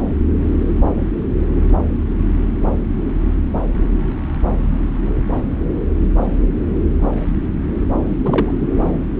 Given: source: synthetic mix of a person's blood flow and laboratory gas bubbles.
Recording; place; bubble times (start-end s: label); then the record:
Doppler ultrasound of blood flow; subclavian vein
8.24-8.52 s: bubbles
8.59-8.90 s: bubbles
From the record:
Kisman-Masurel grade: 213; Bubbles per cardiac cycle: several, 3 to 8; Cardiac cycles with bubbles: 1 to 10%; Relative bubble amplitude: loud (0.450 to 0.775); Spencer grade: 1 (occasional bubble signal discernible with the cardiac motion signal, with majority of cardiac periods free of bubbles); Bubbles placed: anywhere in the cardiac cycle